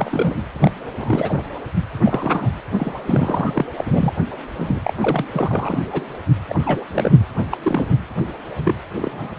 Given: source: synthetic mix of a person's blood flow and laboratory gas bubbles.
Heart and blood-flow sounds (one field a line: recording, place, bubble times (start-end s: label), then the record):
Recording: Doppler ultrasound of blood flow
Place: precordium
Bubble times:
0.00-0.37 s: bubbles
0.55-0.71 s: bubbles
0.99-1.43 s: bubbles
2.05-2.50 s: bubbles
2.77-2.92 s: bubbles
3.06-3.65 s: bubbles
3.76-4.12 s: bubbles
4.58-4.81 s: bubbles
4.84-4.93 s: bubbles
5.00-5.25 s: bubbles
5.33-5.82 s: bubbles
5.92-6.04 s: bubbles
6.49-6.84 s: bubbles
6.88-7.19 s: bubbles
7.38-7.44 s: bubbles
7.51-7.57 s: bubbles
7.62-7.93 s: bubbles
8.58-8.75 s: bubbles
9.00-9.34 s: bubbles
From the record:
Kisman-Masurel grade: 242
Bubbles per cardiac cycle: several, 3 to 8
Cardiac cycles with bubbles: 100%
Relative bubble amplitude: moderate (0.250 to 0.450)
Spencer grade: 3 (all of the cardiac periods contain showers or single bubble signals, but not dominating or overriding the cardiac motion signals)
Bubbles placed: anywhere in the cardiac cycle